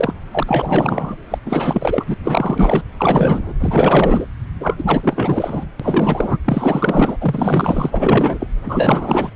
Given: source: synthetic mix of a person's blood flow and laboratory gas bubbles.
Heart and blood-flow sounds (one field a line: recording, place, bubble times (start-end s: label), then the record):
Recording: Doppler ultrasound of blood flow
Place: subclavian vein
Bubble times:
0.00-0.14 s: bubbles
0.31-0.43 s: bubbles
0.46-1.16 s: bubbles
1.30-1.38 s: bubbles
1.45-2.04 s: bubbles
2.07-2.14 s: bubbles
2.22-2.82 s: bubbles
2.98-3.53 s: bubbles
3.60-4.27 s: bubbles
4.60-5.66 s: bubbles
5.79-6.37 s: bubbles
6.45-7.17 s: bubbles
7.21-8.47 s: bubbles
8.66-9.30 s: bubbles
From the record:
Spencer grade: 4 (maximum detectable bubble signal sounding continuously throughout systole and diastole of every cardiac period, and overriding the amplitude of the normal cardiac signals)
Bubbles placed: anywhere in the cardiac cycle